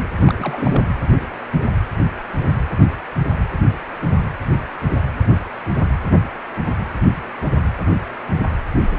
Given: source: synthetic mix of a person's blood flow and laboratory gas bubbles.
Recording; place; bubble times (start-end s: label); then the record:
Doppler ultrasound of blood flow; precordium
0.19-0.82 s: bubbles
From the record:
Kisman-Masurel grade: 211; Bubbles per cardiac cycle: several, 3 to 8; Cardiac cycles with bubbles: 1 to 10%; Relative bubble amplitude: barely perceptible (0.100 to 0.250); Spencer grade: 1 (occasional bubble signal discernible with the cardiac motion signal, with majority of cardiac periods free of bubbles); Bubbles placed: anywhere in the cardiac cycle